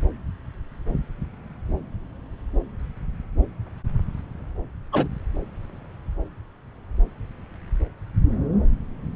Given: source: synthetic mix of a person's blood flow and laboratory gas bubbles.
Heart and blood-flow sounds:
Doppler ultrasound of blood flow; subclavian vein
4.92-5.08 s: bubbles
From the record:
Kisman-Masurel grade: 112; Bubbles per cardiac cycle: 1 to 2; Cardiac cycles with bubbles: 1 to 10%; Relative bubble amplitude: moderate (0.250 to 0.450); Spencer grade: 1 (occasional bubble signal discernible with the cardiac motion signal, with majority of cardiac periods free of bubbles); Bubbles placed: anywhere in the cardiac cycle

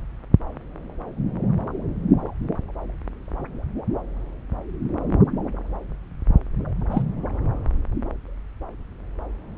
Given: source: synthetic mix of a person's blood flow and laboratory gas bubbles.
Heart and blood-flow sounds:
Doppler ultrasound of blood flow; subclavian vein
6.91-7.03 s: bubbles
From the record:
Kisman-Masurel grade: 112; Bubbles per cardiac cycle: 1 to 2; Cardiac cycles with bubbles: 1 to 10%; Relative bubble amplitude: moderate (0.250 to 0.450); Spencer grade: 1 (occasional bubble signal discernible with the cardiac motion signal, with majority of cardiac periods free of bubbles); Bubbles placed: anywhere in the cardiac cycle

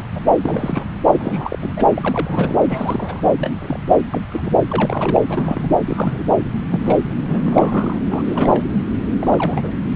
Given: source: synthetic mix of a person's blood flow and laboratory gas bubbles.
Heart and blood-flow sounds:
Doppler ultrasound of blood flow; subclavian vein
0.00-0.06 s: bubbles
0.15-0.19 s: bubbles
0.43-0.86 s: bubbles
1.12-1.58 s: bubbles
1.61-1.73 s: bubbles
1.76-1.84 s: bubbles
1.96-2.60 s: bubbles
2.67-3.20 s: bubbles
3.39-3.53 s: bubbles
3.60-3.78 s: bubbles
3.89-3.94 s: bubbles
4.12-4.21 s: bubbles
4.31-4.53 s: bubbles
4.70-5.22 s: bubbles
5.29-5.68 s: bubbles
5.87-6.24 s: bubbles
6.72-6.80 s: bubbles
6.84-6.98 s: bubbles
7.28-7.99 s: bubbles
8.09-8.66 s: bubbles
9.19-9.73 s: bubbles
From the record:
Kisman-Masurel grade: 242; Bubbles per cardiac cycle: several, 3 to 8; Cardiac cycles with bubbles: 100%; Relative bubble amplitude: moderate (0.250 to 0.450); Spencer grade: 3 (all of the cardiac periods contain showers or single bubble signals, but not dominating or overriding the cardiac motion signals); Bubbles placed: anywhere in the cardiac cycle

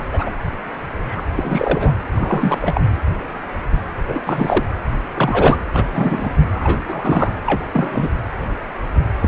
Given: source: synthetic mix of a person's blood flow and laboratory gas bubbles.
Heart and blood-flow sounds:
Doppler ultrasound of blood flow; precordium
0.13-0.30 s: bubbles
1.06-1.22 s: bubbles
1.36-1.94 s: bubbles
2.15-2.58 s: bubbles
2.61-2.81 s: bubbles
4.08-4.20 s: bubbles
4.26-4.63 s: bubbles
5.16-5.61 s: bubbles
5.73-5.85 s: bubbles
5.92-6.30 s: bubbles
6.54-7.33 s: bubbles
7.46-7.65 s: bubbles
7.73-8.09 s: bubbles
9.20-9.28 s: bubbles
From the record:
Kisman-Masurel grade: 232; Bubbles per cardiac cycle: several, 3 to 8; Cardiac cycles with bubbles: 50 to 99%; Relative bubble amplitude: moderate (0.250 to 0.450); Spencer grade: 3 (all of the cardiac periods contain showers or single bubble signals, but not dominating or overriding the cardiac motion signals); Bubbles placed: anywhere in the cardiac cycle

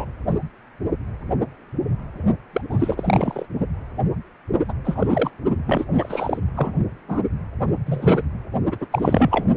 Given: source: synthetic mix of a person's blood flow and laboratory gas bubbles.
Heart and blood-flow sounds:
Doppler ultrasound of blood flow; precordium
0.00-0.05 s: bubbles
2.52-2.62 s: bubbles
2.69-3.46 s: bubbles
4.68-4.73 s: bubbles
4.84-5.30 s: bubbles
5.66-5.85 s: bubbles
5.97-6.39 s: bubbles
6.54-6.75 s: bubbles
7.08-7.22 s: bubbles
7.85-8.24 s: bubbles
8.71-8.76 s: bubbles
8.79-8.87 s: bubbles
8.91-9.45 s: bubbles
From the record:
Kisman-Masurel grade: 233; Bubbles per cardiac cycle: several, 3 to 8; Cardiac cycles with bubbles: 50 to 99%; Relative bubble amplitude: loud (0.450 to 0.775); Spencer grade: 3 (all of the cardiac periods contain showers or single bubble signals, but not dominating or overriding the cardiac motion signals); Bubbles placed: only in the low amplitude regions of the cardiac cycle

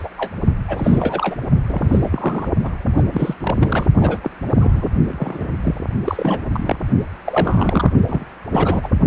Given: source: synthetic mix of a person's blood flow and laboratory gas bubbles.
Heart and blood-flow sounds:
Doppler ultrasound of blood flow; precordium
0.00-0.08 s: bubbles
0.17-0.32 s: bubbles
0.68-1.36 s: bubbles
1.68-2.49 s: bubbles
2.63-2.70 s: bubbles
2.97-3.04 s: bubbles
3.12-3.34 s: bubbles
3.41-3.87 s: bubbles
3.97-4.18 s: bubbles
4.22-4.30 s: bubbles
4.48-4.88 s: bubbles
5.08-5.48 s: bubbles
5.63-5.79 s: bubbles
6.04-6.40 s: bubbles
6.52-6.78 s: bubbles
7.25-7.91 s: bubbles
8.05-8.26 s: bubbles
8.53-8.89 s: bubbles
From the record:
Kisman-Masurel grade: 342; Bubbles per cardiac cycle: rolling drumbeat, 9 or more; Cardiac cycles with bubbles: 100%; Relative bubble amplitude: moderate (0.250 to 0.450); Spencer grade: 3 (all of the cardiac periods contain showers or single bubble signals, but not dominating or overriding the cardiac motion signals); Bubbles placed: only in the low amplitude regions of the cardiac cycle

